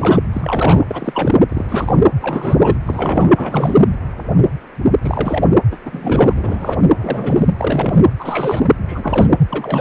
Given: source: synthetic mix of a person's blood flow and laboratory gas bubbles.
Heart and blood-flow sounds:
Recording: Doppler ultrasound of blood flow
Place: precordium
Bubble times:
0.00-0.19 s: bubbles
0.33-0.84 s: bubbles
0.88-1.35 s: bubbles
1.49-1.65 s: bubbles
1.69-2.06 s: bubbles
2.21-2.77 s: bubbles
2.85-3.33 s: bubbles
3.35-3.83 s: bubbles
5.03-5.54 s: bubbles
5.71-5.78 s: bubbles
5.84-6.33 s: bubbles
6.36-6.80 s: bubbles
6.96-7.52 s: bubbles
7.57-8.04 s: bubbles
8.19-8.72 s: bubbles
8.87-9.27 s: bubbles
9.47-9.81 s: bubbles
From the record:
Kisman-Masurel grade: 333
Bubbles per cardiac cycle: rolling drumbeat, 9 or more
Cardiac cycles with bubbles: 50 to 99%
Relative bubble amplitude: loud (0.450 to 0.775)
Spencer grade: 3 (all of the cardiac periods contain showers or single bubble signals, but not dominating or overriding the cardiac motion signals)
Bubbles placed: anywhere in the cardiac cycle

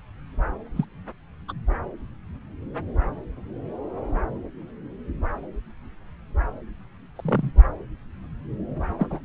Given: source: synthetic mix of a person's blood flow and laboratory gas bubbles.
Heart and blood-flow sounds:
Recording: Doppler ultrasound of blood flow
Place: subclavian vein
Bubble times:
0.76-0.85 s: bubbles
1.48-1.52 s: bubbles
7.15-7.51 s: bubbles
8.98-9.21 s: bubbles
From the record:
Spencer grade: 2 (many but less than half of the cardiac periods contain bubble signals, singularly or in groups)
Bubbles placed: anywhere in the cardiac cycle

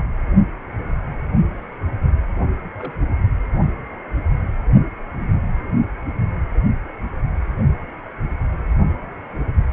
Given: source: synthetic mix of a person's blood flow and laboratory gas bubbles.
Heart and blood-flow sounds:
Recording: Doppler ultrasound of blood flow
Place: precordium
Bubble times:
2.79-2.94 s: bubbles
From the record:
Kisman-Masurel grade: 111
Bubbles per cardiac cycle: 1 to 2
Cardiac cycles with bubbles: 1 to 10%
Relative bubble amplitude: barely perceptible (0.100 to 0.250)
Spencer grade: 1 (occasional bubble signal discernible with the cardiac motion signal, with majority of cardiac periods free of bubbles)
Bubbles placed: anywhere in the cardiac cycle

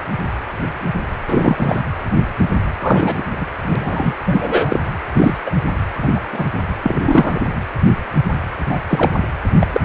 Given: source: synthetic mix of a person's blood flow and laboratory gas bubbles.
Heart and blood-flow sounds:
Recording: Doppler ultrasound of blood flow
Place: precordium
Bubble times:
1.27-1.82 s: bubbles
2.81-3.23 s: bubbles
3.31-3.45 s: bubbles
3.62-4.15 s: bubbles
4.26-4.80 s: bubbles
5.14-5.38 s: bubbles
5.46-5.51 s: bubbles
6.02-6.08 s: bubbles
6.15-6.21 s: bubbles
6.33-6.45 s: bubbles
6.83-7.48 s: bubbles
8.65-8.79 s: bubbles
8.89-9.12 s: bubbles
9.61-9.67 s: bubbles
9.72-9.80 s: bubbles
From the record:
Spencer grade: 3 (all of the cardiac periods contain showers or single bubble signals, but not dominating or overriding the cardiac motion signals)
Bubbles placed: anywhere in the cardiac cycle

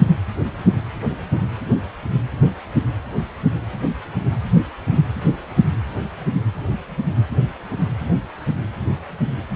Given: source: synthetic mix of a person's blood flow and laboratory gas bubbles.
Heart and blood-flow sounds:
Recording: Doppler ultrasound of blood flow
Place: precordium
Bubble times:
6.71-6.75 s: bubbles
From the record:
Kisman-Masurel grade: 111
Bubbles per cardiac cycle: 1 to 2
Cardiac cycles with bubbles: 1 to 10%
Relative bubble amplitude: barely perceptible (0.100 to 0.250)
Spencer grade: 1 (occasional bubble signal discernible with the cardiac motion signal, with majority of cardiac periods free of bubbles)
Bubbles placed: anywhere in the cardiac cycle

